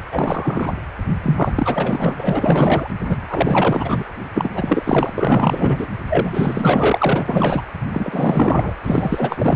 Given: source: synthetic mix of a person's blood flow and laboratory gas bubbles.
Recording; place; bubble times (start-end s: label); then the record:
Doppler ultrasound of blood flow; precordium
0.11-0.74 s: bubbles
1.23-2.14 s: bubbles
2.17-2.90 s: bubbles
3.08-4.04 s: bubbles
4.34-5.88 s: bubbles
6.09-7.65 s: bubbles
7.92-8.74 s: bubbles
8.83-9.56 s: bubbles
From the record:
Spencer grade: 4 (maximum detectable bubble signal sounding continuously throughout systole and diastole of every cardiac period, and overriding the amplitude of the normal cardiac signals); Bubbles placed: anywhere in the cardiac cycle